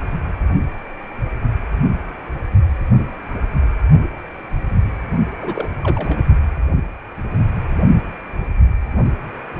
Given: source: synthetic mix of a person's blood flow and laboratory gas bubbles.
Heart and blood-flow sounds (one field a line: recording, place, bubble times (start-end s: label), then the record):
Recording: Doppler ultrasound of blood flow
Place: precordium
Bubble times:
5.38-5.69 s: bubbles
5.83-6.19 s: bubbles
From the record:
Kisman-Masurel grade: 211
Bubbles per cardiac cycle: several, 3 to 8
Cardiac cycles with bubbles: 1 to 10%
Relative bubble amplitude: barely perceptible (0.100 to 0.250)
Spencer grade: 1 (occasional bubble signal discernible with the cardiac motion signal, with majority of cardiac periods free of bubbles)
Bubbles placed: only in the low amplitude regions of the cardiac cycle